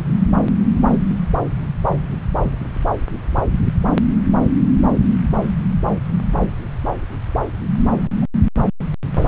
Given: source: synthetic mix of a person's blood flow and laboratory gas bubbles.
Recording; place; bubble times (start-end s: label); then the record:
Doppler ultrasound of blood flow; subclavian vein
7.91-8.10 s: bubbles
8.21-8.26 s: bubbles
From the record:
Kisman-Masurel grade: 121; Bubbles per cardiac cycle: 1 to 2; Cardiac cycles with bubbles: 10 to 50%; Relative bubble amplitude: barely perceptible (0.100 to 0.250); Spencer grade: 2 (many but less than half of the cardiac periods contain bubble signals, singularly or in groups); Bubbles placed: anywhere in the cardiac cycle